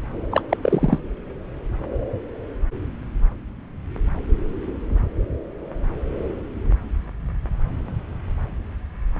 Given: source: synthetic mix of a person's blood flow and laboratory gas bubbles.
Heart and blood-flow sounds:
Doppler ultrasound of blood flow; subclavian vein
0.31-0.41 s: bubbles
0.49-0.57 s: bubbles
0.62-0.99 s: bubbles
From the record:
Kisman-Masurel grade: 223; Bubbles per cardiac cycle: several, 3 to 8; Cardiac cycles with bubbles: 10 to 50%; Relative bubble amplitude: loud (0.450 to 0.775); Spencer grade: 2 (many but less than half of the cardiac periods contain bubble signals, singularly or in groups); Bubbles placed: anywhere in the cardiac cycle

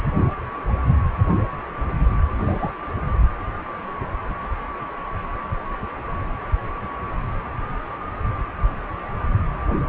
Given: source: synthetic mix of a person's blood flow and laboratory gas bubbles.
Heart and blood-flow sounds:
Doppler ultrasound of blood flow; precordium
2.38-2.70 s: bubbles
From the record:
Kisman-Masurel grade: 111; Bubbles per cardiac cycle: 1 to 2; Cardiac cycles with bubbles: 1 to 10%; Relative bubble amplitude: barely perceptible (0.100 to 0.250); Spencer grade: 1 (occasional bubble signal discernible with the cardiac motion signal, with majority of cardiac periods free of bubbles); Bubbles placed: only in the low amplitude regions of the cardiac cycle

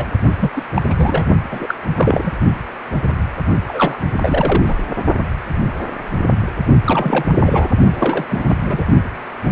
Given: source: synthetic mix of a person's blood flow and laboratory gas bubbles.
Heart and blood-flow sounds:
Doppler ultrasound of blood flow; precordium
0.00-0.10 s: bubbles
0.39-0.51 s: bubbles
0.55-0.63 s: bubbles
0.76-0.82 s: bubbles
0.89-1.26 s: bubbles
1.50-1.74 s: bubbles
1.95-2.31 s: bubbles
3.67-3.98 s: bubbles
4.17-4.75 s: bubbles
6.84-7.70 s: bubbles
7.90-8.25 s: bubbles
8.29-8.55 s: bubbles
8.62-8.86 s: bubbles
From the record:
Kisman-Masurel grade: 332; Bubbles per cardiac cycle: rolling drumbeat, 9 or more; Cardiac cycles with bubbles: 50 to 99%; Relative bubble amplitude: moderate (0.250 to 0.450); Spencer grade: 3 (all of the cardiac periods contain showers or single bubble signals, but not dominating or overriding the cardiac motion signals); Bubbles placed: only in the low amplitude regions of the cardiac cycle

